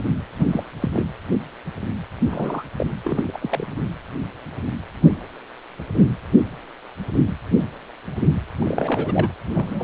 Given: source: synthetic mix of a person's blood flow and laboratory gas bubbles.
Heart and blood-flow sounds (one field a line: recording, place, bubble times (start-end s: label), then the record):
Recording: Doppler ultrasound of blood flow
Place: precordium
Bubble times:
0.00-0.03 s: bubbles
0.39-0.46 s: bubbles
0.52-0.64 s: bubbles
0.81-0.90 s: bubbles
0.93-1.06 s: bubbles
2.29-2.65 s: bubbles
2.78-2.86 s: bubbles
3.04-3.72 s: bubbles
8.59-9.31 s: bubbles
9.54-9.84 s: bubbles
From the record:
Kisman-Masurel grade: 232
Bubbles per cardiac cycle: several, 3 to 8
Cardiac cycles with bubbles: 50 to 99%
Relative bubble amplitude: moderate (0.250 to 0.450)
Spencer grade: 3 (all of the cardiac periods contain showers or single bubble signals, but not dominating or overriding the cardiac motion signals)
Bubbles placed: anywhere in the cardiac cycle